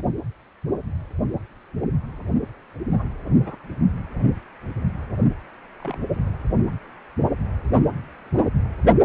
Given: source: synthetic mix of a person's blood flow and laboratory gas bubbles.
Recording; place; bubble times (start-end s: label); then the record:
Doppler ultrasound of blood flow; precordium
0.00-0.07 s: bubbles
1.82-1.88 s: bubbles
2.92-3.08 s: bubbles
3.42-3.55 s: bubbles
5.79-5.98 s: bubbles
6.01-6.21 s: bubbles
From the record:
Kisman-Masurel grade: 121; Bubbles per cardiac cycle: 1 to 2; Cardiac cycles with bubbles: 10 to 50%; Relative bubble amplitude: barely perceptible (0.100 to 0.250); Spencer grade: 2 (many but less than half of the cardiac periods contain bubble signals, singularly or in groups); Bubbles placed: only in the low amplitude regions of the cardiac cycle